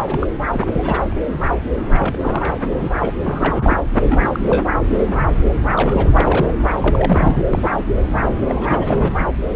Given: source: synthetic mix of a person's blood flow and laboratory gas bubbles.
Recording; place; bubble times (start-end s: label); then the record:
Doppler ultrasound of blood flow; subclavian vein
0.06-0.28 s: bubbles
0.52-0.67 s: bubbles
0.71-1.17 s: bubbles
1.81-3.15 s: bubbles
3.25-3.77 s: bubbles
4.08-4.64 s: bubbles
5.75-6.51 s: bubbles
6.80-7.46 s: bubbles
7.50-7.70 s: bubbles
8.05-8.20 s: bubbles
8.49-9.12 s: bubbles
9.19-9.26 s: bubbles
From the record:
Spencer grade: 3 (all of the cardiac periods contain showers or single bubble signals, but not dominating or overriding the cardiac motion signals); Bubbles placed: anywhere in the cardiac cycle